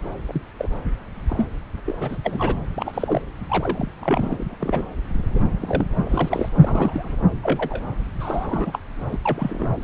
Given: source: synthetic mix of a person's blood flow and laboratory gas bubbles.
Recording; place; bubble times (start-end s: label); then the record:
Doppler ultrasound of blood flow; subclavian vein
0.28-0.41 s: bubbles
0.57-0.68 s: bubbles
1.28-1.50 s: bubbles
1.85-2.18 s: bubbles
2.25-2.55 s: bubbles
2.75-3.22 s: bubbles
3.49-3.92 s: bubbles
3.97-4.45 s: bubbles
4.48-4.56 s: bubbles
4.59-4.85 s: bubbles
5.34-5.39 s: bubbles
5.61-5.86 s: bubbles
6.05-6.49 s: bubbles
6.60-7.15 s: bubbles
7.43-7.81 s: bubbles
8.20-8.79 s: bubbles
9.11-9.19 s: bubbles
9.25-9.69 s: bubbles
9.81-9.84 s: bubbles
From the record:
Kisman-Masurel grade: 242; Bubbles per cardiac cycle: several, 3 to 8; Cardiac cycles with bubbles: 100%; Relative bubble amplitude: moderate (0.250 to 0.450); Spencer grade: 3 (all of the cardiac periods contain showers or single bubble signals, but not dominating or overriding the cardiac motion signals); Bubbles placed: anywhere in the cardiac cycle